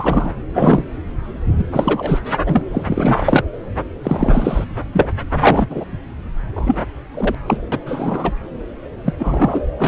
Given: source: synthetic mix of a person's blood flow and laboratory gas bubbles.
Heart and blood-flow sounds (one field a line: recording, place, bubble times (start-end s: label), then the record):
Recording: Doppler ultrasound of blood flow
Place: subclavian vein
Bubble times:
0.00-0.32 s: bubbles
0.54-0.84 s: bubbles
1.57-1.65 s: bubbles
1.71-2.21 s: bubbles
2.46-2.65 s: bubbles
2.71-3.44 s: bubbles
4.03-4.65 s: bubbles
4.93-5.07 s: bubbles
5.33-5.67 s: bubbles
5.70-5.85 s: bubbles
6.56-6.77 s: bubbles
7.14-7.35 s: bubbles
7.46-7.58 s: bubbles
7.72-7.79 s: bubbles
7.86-8.32 s: bubbles
9.05-9.13 s: bubbles
9.19-9.62 s: bubbles
9.78-9.88 s: bubbles
From the record:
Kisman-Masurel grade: 243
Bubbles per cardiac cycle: several, 3 to 8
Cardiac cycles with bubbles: 100%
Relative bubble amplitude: loud (0.450 to 0.775)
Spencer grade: 3 (all of the cardiac periods contain showers or single bubble signals, but not dominating or overriding the cardiac motion signals)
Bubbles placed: anywhere in the cardiac cycle